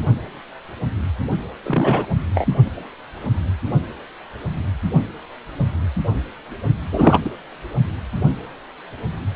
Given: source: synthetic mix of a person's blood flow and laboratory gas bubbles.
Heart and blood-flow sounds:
Doppler ultrasound of blood flow; precordium
1.64-2.05 s: bubbles
2.34-2.47 s: bubbles
6.92-7.21 s: bubbles
7.25-7.30 s: bubbles
From the record:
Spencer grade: 2 (many but less than half of the cardiac periods contain bubble signals, singularly or in groups); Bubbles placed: only in the low amplitude regions of the cardiac cycle

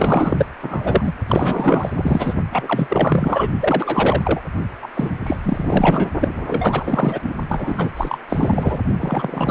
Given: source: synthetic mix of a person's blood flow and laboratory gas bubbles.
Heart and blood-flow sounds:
Doppler ultrasound of blood flow; precordium
0.00-0.46 s: bubbles
0.61-1.14 s: bubbles
1.28-2.35 s: bubbles
2.52-3.50 s: bubbles
3.60-4.41 s: bubbles
4.82-4.88 s: bubbles
4.94-5.17 s: bubbles
5.23-6.09 s: bubbles
6.19-7.19 s: bubbles
7.23-7.33 s: bubbles
7.48-7.91 s: bubbles
7.96-8.18 s: bubbles
8.29-8.79 s: bubbles
9.00-9.51 s: bubbles
From the record:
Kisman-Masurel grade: 444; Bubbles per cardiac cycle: continuous sound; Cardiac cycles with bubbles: 100%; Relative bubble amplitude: maximal (0.775 to 0.999); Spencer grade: 4 (maximum detectable bubble signal sounding continuously throughout systole and diastole of every cardiac period, and overriding the amplitude of the normal cardiac signals); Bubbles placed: only in the low amplitude regions of the cardiac cycle

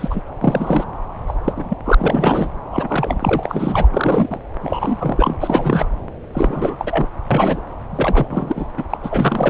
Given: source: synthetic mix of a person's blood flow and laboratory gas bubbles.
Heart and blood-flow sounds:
Doppler ultrasound of blood flow; subclavian vein
0.00-0.21 s: bubbles
0.40-0.85 s: bubbles
1.28-1.34 s: bubbles
1.45-1.53 s: bubbles
1.56-1.77 s: bubbles
1.85-1.95 s: bubbles
1.98-2.48 s: bubbles
2.71-3.87 s: bubbles
3.92-4.39 s: bubbles
4.61-5.37 s: bubbles
5.40-5.88 s: bubbles
6.32-7.08 s: bubbles
7.30-7.61 s: bubbles
7.92-8.66 s: bubbles
8.77-8.84 s: bubbles
8.90-8.97 s: bubbles
9.03-9.49 s: bubbles
From the record:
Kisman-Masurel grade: 342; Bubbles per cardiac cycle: rolling drumbeat, 9 or more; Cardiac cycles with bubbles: 100%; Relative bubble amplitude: moderate (0.250 to 0.450); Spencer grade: 3 (all of the cardiac periods contain showers or single bubble signals, but not dominating or overriding the cardiac motion signals); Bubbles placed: anywhere in the cardiac cycle

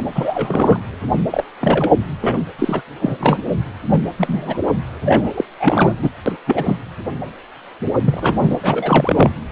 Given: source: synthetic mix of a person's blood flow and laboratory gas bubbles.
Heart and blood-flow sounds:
Doppler ultrasound of blood flow; precordium
0.00-0.02 s: bubbles
0.15-0.80 s: bubbles
1.30-1.44 s: bubbles
1.60-1.92 s: bubbles
2.21-2.39 s: bubbles
2.58-2.81 s: bubbles
3.01-3.17 s: bubbles
3.19-3.38 s: bubbles
3.90-4.01 s: bubbles
4.18-4.58 s: bubbles
5.05-5.29 s: bubbles
5.34-5.44 s: bubbles
5.59-5.93 s: bubbles
6.02-6.10 s: bubbles
6.26-6.33 s: bubbles
6.47-6.77 s: bubbles
8.05-8.58 s: bubbles
8.63-9.31 s: bubbles
From the record:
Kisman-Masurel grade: 233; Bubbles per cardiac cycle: several, 3 to 8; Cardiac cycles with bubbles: 50 to 99%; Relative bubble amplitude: loud (0.450 to 0.775); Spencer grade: 3 (all of the cardiac periods contain showers or single bubble signals, but not dominating or overriding the cardiac motion signals); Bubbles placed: anywhere in the cardiac cycle

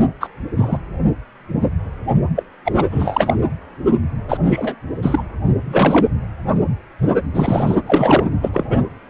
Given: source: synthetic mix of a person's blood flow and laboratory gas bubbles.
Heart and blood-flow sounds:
Doppler ultrasound of blood flow; precordium
0.20-0.28 s: bubbles
0.56-0.78 s: bubbles
2.35-2.43 s: bubbles
2.64-2.73 s: bubbles
2.77-2.85 s: bubbles
2.91-3.38 s: bubbles
4.29-4.38 s: bubbles
4.49-4.75 s: bubbles
5.02-5.23 s: bubbles
5.65-6.11 s: bubbles
7.34-7.75 s: bubbles
7.86-8.24 s: bubbles
8.41-8.49 s: bubbles
8.52-8.77 s: bubbles
From the record:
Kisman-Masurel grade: 233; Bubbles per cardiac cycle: several, 3 to 8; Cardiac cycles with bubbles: 50 to 99%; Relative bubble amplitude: loud (0.450 to 0.775); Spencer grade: 3 (all of the cardiac periods contain showers or single bubble signals, but not dominating or overriding the cardiac motion signals); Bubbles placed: anywhere in the cardiac cycle

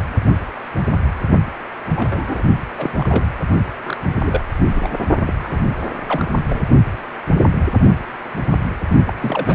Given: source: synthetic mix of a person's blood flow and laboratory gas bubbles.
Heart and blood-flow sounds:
Doppler ultrasound of blood flow; precordium
1.89-2.44 s: bubbles
2.77-2.91 s: bubbles
2.97-3.27 s: bubbles
3.83-3.97 s: bubbles
4.20-4.45 s: bubbles
4.75-4.88 s: bubbles
5.26-5.33 s: bubbles
5.38-5.61 s: bubbles
6.06-6.30 s: bubbles
6.49-6.62 s: bubbles
9.05-9.13 s: bubbles
9.20-9.55 s: bubbles
From the record:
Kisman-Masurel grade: 232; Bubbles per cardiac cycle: several, 3 to 8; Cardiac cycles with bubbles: 50 to 99%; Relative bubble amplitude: moderate (0.250 to 0.450); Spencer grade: 3 (all of the cardiac periods contain showers or single bubble signals, but not dominating or overriding the cardiac motion signals); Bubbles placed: only in the low amplitude regions of the cardiac cycle

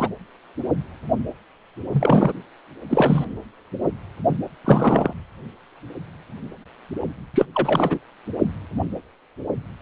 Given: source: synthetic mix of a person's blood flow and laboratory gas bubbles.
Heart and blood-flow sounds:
Doppler ultrasound of blood flow; precordium
0.00-0.09 s: bubbles
1.92-2.33 s: bubbles
2.89-3.24 s: bubbles
4.65-5.13 s: bubbles
7.34-7.45 s: bubbles
7.53-7.99 s: bubbles
From the record:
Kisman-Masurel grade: 223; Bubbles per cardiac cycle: several, 3 to 8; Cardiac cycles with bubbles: 10 to 50%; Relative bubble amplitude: loud (0.450 to 0.775); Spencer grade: 2 (many but less than half of the cardiac periods contain bubble signals, singularly or in groups); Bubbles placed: anywhere in the cardiac cycle

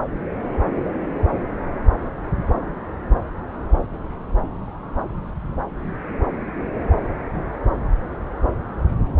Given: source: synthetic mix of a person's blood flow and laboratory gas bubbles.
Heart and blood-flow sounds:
Doppler ultrasound of blood flow; subclavian vein
no bubbles
From the record:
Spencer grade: 0 (complete lack of bubble signals)

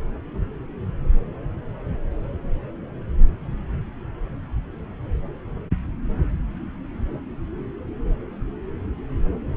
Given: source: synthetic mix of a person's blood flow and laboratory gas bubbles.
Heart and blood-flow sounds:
Doppler ultrasound of blood flow; subclavian vein
no bubbles
From the record:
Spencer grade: 0 (complete lack of bubble signals)

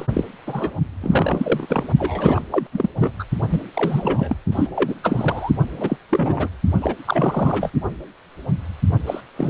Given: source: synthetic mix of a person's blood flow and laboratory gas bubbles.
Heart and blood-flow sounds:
Doppler ultrasound of blood flow; precordium
0.00-0.07 s: bubbles
0.14-0.24 s: bubbles
0.46-0.75 s: bubbles
1.01-1.67 s: bubbles
1.69-1.88 s: bubbles
1.98-2.42 s: bubbles
2.50-2.67 s: bubbles
2.72-2.90 s: bubbles
3.00-3.12 s: bubbles
3.19-3.24 s: bubbles
3.48-3.62 s: bubbles
3.73-4.36 s: bubbles
4.52-4.69 s: bubbles
4.75-4.95 s: bubbles
5.03-5.51 s: bubbles
5.77-5.96 s: bubbles
6.09-6.48 s: bubbles
6.82-6.95 s: bubbles
7.06-7.70 s: bubbles
9.06-9.21 s: bubbles
9.36-9.50 s: bubbles
From the record:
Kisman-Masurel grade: 332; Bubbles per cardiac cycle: rolling drumbeat, 9 or more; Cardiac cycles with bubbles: 50 to 99%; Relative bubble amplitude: moderate (0.250 to 0.450); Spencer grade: 3 (all of the cardiac periods contain showers or single bubble signals, but not dominating or overriding the cardiac motion signals); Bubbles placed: only in the low amplitude regions of the cardiac cycle

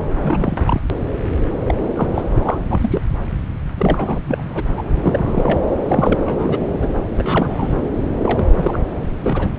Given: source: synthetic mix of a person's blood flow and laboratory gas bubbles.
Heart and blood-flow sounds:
Doppler ultrasound of blood flow; subclavian vein
0.22-0.81 s: bubbles
1.67-1.75 s: bubbles
1.96-2.10 s: bubbles
2.14-2.22 s: bubbles
2.35-2.58 s: bubbles
2.69-3.01 s: bubbles
3.78-4.19 s: bubbles
4.27-4.44 s: bubbles
4.50-4.63 s: bubbles
4.77-4.83 s: bubbles
5.01-5.58 s: bubbles
5.88-6.58 s: bubbles
6.81-6.88 s: bubbles
7.17-7.74 s: bubbles
8.21-8.45 s: bubbles
8.55-8.78 s: bubbles
9.23-9.48 s: bubbles
From the record:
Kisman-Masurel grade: 232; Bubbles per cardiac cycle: several, 3 to 8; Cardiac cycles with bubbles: 50 to 99%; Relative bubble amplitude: moderate (0.250 to 0.450); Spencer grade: 3 (all of the cardiac periods contain showers or single bubble signals, but not dominating or overriding the cardiac motion signals); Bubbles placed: anywhere in the cardiac cycle

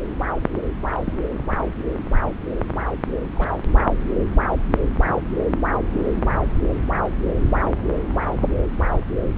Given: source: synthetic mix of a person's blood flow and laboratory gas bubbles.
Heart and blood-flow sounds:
Doppler ultrasound of blood flow; subclavian vein
0.82-1.00 s: bubbles
1.05-1.17 s: bubbles
3.35-3.60 s: bubbles
From the record:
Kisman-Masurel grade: 121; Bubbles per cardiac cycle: 1 to 2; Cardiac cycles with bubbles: 10 to 50%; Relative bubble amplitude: barely perceptible (0.100 to 0.250); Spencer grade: 2 (many but less than half of the cardiac periods contain bubble signals, singularly or in groups); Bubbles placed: anywhere in the cardiac cycle

